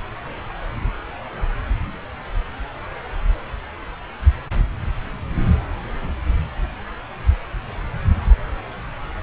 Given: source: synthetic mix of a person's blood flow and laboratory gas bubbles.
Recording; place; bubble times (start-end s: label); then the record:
Doppler ultrasound of blood flow; subclavian vein
no bubbles
From the record:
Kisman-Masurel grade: 000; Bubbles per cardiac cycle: 0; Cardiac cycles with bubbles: 0%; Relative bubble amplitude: no bubbles discernible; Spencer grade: 0 (complete lack of bubble signals)